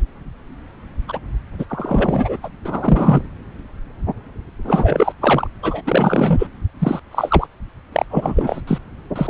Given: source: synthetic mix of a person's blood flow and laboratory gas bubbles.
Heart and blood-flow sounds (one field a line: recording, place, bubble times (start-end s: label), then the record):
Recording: Doppler ultrasound of blood flow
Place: subclavian vein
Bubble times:
1.08-1.20 s: bubbles
1.58-1.66 s: bubbles
1.69-2.36 s: bubbles
2.42-2.49 s: bubbles
2.65-3.21 s: bubbles
4.64-5.12 s: bubbles
5.21-5.47 s: bubbles
5.62-5.82 s: bubbles
5.85-6.47 s: bubbles
6.79-7.00 s: bubbles
7.11-7.47 s: bubbles
7.92-8.06 s: bubbles
8.10-8.61 s: bubbles
8.67-8.78 s: bubbles
9.16-9.30 s: bubbles
From the record:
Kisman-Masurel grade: 333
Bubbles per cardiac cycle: rolling drumbeat, 9 or more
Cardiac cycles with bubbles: 50 to 99%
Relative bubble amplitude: loud (0.450 to 0.775)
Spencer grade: 3 (all of the cardiac periods contain showers or single bubble signals, but not dominating or overriding the cardiac motion signals)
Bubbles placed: anywhere in the cardiac cycle